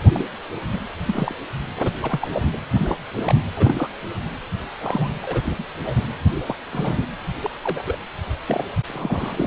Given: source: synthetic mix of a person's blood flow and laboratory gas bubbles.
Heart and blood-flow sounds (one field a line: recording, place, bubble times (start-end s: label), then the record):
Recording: Doppler ultrasound of blood flow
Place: precordium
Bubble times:
0.14-0.26 s: bubbles
0.73-0.81 s: bubbles
1.07-1.35 s: bubbles
1.82-1.91 s: bubbles
2.03-2.29 s: bubbles
2.33-2.58 s: bubbles
2.77-2.96 s: bubbles
3.11-3.35 s: bubbles
3.56-3.90 s: bubbles
4.81-5.19 s: bubbles
5.22-5.42 s: bubbles
5.45-5.64 s: bubbles
5.85-5.96 s: bubbles
6.46-6.55 s: bubbles
6.72-7.05 s: bubbles
7.42-7.50 s: bubbles
7.60-7.96 s: bubbles
8.47-8.64 s: bubbles
8.88-9.47 s: bubbles
From the record:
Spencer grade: 3 (all of the cardiac periods contain showers or single bubble signals, but not dominating or overriding the cardiac motion signals)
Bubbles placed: anywhere in the cardiac cycle